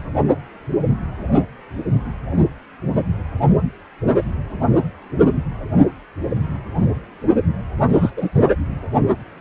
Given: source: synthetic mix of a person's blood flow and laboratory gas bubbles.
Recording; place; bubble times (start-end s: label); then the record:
Doppler ultrasound of blood flow; precordium
7.92-8.10 s: bubbles
8.16-8.29 s: bubbles
From the record:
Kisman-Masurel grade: 213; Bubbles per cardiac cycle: several, 3 to 8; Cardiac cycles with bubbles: 1 to 10%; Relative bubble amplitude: loud (0.450 to 0.775); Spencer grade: 1 (occasional bubble signal discernible with the cardiac motion signal, with majority of cardiac periods free of bubbles); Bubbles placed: only in the low amplitude regions of the cardiac cycle